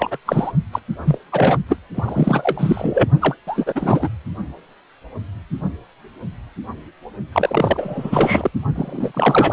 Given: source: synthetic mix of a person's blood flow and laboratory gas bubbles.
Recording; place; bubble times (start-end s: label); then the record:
Doppler ultrasound of blood flow; precordium
0.00-0.17 s: bubbles
0.26-0.52 s: bubbles
0.72-0.79 s: bubbles
1.04-1.18 s: bubbles
1.32-1.58 s: bubbles
1.68-1.76 s: bubbles
1.95-3.09 s: bubbles
3.21-3.35 s: bubbles
3.47-4.09 s: bubbles
7.32-8.51 s: bubbles
8.75-9.53 s: bubbles
From the record:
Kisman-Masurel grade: 333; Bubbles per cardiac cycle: rolling drumbeat, 9 or more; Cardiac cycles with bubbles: 50 to 99%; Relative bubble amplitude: loud (0.450 to 0.775); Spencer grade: 3 (all of the cardiac periods contain showers or single bubble signals, but not dominating or overriding the cardiac motion signals); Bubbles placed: only in the low amplitude regions of the cardiac cycle